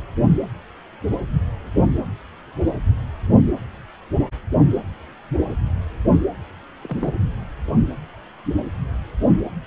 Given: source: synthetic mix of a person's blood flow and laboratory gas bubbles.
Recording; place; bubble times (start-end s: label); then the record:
Doppler ultrasound of blood flow; precordium
6.81-7.14 s: bubbles
From the record:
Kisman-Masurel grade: 111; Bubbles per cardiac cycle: 1 to 2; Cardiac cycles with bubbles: 1 to 10%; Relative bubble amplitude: barely perceptible (0.100 to 0.250); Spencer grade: 1 (occasional bubble signal discernible with the cardiac motion signal, with majority of cardiac periods free of bubbles); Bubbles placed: anywhere in the cardiac cycle